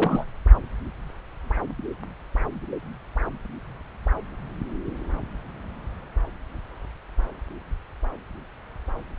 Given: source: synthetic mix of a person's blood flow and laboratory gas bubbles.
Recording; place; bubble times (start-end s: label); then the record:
Doppler ultrasound of blood flow; subclavian vein
0.00-0.24 s: bubbles
From the record:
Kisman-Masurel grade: 221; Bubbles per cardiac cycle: several, 3 to 8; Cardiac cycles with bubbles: 10 to 50%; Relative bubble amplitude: barely perceptible (0.100 to 0.250); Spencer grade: 2 (many but less than half of the cardiac periods contain bubble signals, singularly or in groups); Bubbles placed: anywhere in the cardiac cycle